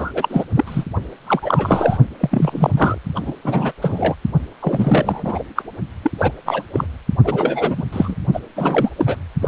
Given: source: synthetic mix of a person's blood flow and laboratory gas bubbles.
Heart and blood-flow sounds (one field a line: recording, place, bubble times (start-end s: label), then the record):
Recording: Doppler ultrasound of blood flow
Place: precordium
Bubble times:
0.00-0.12 s: bubbles
0.14-0.45 s: bubbles
0.55-0.84 s: bubbles
1.26-1.98 s: bubbles
2.20-2.71 s: bubbles
2.77-2.98 s: bubbles
3.15-3.33 s: bubbles
3.44-3.72 s: bubbles
3.82-4.15 s: bubbles
4.60-5.43 s: bubbles
5.55-5.62 s: bubbles
6.04-6.11 s: bubbles
6.18-6.32 s: bubbles
6.46-6.63 s: bubbles
6.72-6.87 s: bubbles
7.25-7.83 s: bubbles
7.92-8.15 s: bubbles
8.34-8.40 s: bubbles
8.56-8.91 s: bubbles
8.97-9.17 s: bubbles
9.41-9.48 s: bubbles
From the record:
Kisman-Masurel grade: 343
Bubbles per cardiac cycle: rolling drumbeat, 9 or more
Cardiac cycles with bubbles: 100%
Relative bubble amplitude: loud (0.450 to 0.775)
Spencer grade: 3 (all of the cardiac periods contain showers or single bubble signals, but not dominating or overriding the cardiac motion signals)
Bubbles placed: only in the low amplitude regions of the cardiac cycle